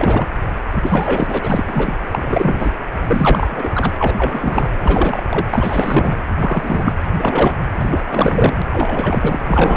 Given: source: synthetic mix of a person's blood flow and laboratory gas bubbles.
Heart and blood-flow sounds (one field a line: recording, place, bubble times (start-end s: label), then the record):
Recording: Doppler ultrasound of blood flow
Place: precordium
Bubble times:
0.00-0.27 s: bubbles
0.82-1.39 s: bubbles
1.43-1.64 s: bubbles
1.67-1.93 s: bubbles
2.12-2.71 s: bubbles
3.08-3.92 s: bubbles
3.95-4.72 s: bubbles
4.79-5.23 s: bubbles
5.29-5.46 s: bubbles
5.50-6.16 s: bubbles
6.39-6.93 s: bubbles
7.19-7.54 s: bubbles
7.75-8.03 s: bubbles
8.10-8.54 s: bubbles
8.71-9.45 s: bubbles
9.47-9.76 s: bubbles
From the record:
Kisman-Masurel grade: 343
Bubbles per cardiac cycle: rolling drumbeat, 9 or more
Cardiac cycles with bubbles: 100%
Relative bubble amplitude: loud (0.450 to 0.775)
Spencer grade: 3 (all of the cardiac periods contain showers or single bubble signals, but not dominating or overriding the cardiac motion signals)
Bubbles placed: anywhere in the cardiac cycle